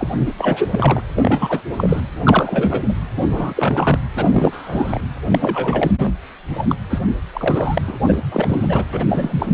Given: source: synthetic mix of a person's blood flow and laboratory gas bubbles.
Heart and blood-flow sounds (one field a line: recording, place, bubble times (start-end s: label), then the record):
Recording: Doppler ultrasound of blood flow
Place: precordium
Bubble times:
0.00-0.33 s: bubbles
0.38-1.02 s: bubbles
1.16-1.62 s: bubbles
1.77-2.00 s: bubbles
2.12-2.92 s: bubbles
3.16-3.98 s: bubbles
4.15-5.00 s: bubbles
5.30-5.91 s: bubbles
5.97-6.12 s: bubbles
6.49-6.65 s: bubbles
6.68-6.76 s: bubbles
6.89-7.02 s: bubbles
7.33-7.82 s: bubbles
7.87-7.99 s: bubbles
8.07-8.19 s: bubbles
8.31-8.85 s: bubbles
8.93-9.06 s: bubbles
9.09-9.52 s: bubbles
From the record:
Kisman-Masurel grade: 343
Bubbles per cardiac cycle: rolling drumbeat, 9 or more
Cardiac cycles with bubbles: 100%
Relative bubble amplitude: loud (0.450 to 0.775)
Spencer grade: 3 (all of the cardiac periods contain showers or single bubble signals, but not dominating or overriding the cardiac motion signals)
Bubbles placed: anywhere in the cardiac cycle